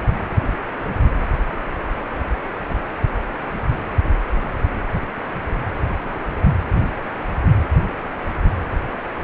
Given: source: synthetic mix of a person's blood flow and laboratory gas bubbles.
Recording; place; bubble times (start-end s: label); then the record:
Doppler ultrasound of blood flow; precordium
no bubbles
From the record:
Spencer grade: 0 (complete lack of bubble signals)